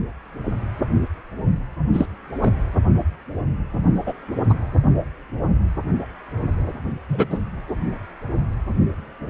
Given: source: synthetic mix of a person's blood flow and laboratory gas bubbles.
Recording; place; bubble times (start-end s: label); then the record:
Doppler ultrasound of blood flow; precordium
1.93-2.06 s: bubbles
2.41-2.53 s: bubbles
4.06-4.13 s: bubbles
4.49-4.54 s: bubbles
7.08-7.38 s: bubbles
From the record:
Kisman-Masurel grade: 123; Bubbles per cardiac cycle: 1 to 2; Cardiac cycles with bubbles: 10 to 50%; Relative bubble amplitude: loud (0.450 to 0.775); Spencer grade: 2 (many but less than half of the cardiac periods contain bubble signals, singularly or in groups); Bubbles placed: anywhere in the cardiac cycle